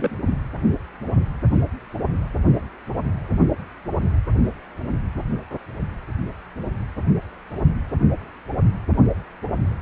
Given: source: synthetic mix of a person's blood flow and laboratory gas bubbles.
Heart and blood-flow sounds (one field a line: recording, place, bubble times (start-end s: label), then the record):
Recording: Doppler ultrasound of blood flow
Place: precordium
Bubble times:
0.00-0.17 s: bubbles
From the record:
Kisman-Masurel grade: 221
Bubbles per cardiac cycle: several, 3 to 8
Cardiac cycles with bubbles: 10 to 50%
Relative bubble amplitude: barely perceptible (0.100 to 0.250)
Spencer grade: 2 (many but less than half of the cardiac periods contain bubble signals, singularly or in groups)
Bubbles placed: anywhere in the cardiac cycle